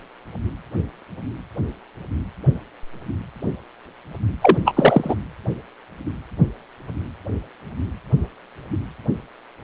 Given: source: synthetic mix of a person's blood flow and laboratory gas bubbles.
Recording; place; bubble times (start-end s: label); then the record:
Doppler ultrasound of blood flow; precordium
4.41-4.58 s: bubbles
4.64-5.15 s: bubbles
From the record:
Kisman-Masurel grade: 213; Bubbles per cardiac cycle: several, 3 to 8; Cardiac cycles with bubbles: 1 to 10%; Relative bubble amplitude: loud (0.450 to 0.775); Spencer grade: 1 (occasional bubble signal discernible with the cardiac motion signal, with majority of cardiac periods free of bubbles); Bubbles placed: anywhere in the cardiac cycle